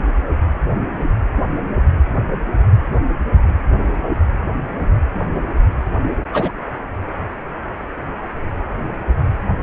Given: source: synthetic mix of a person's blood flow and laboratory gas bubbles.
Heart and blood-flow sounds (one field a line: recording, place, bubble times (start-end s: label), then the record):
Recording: Doppler ultrasound of blood flow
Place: precordium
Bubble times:
0.00-0.04 s: bubbles
6.32-6.52 s: bubbles
From the record:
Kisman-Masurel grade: 122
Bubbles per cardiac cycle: 1 to 2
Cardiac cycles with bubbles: 10 to 50%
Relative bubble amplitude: moderate (0.250 to 0.450)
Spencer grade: 2 (many but less than half of the cardiac periods contain bubble signals, singularly or in groups)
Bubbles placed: anywhere in the cardiac cycle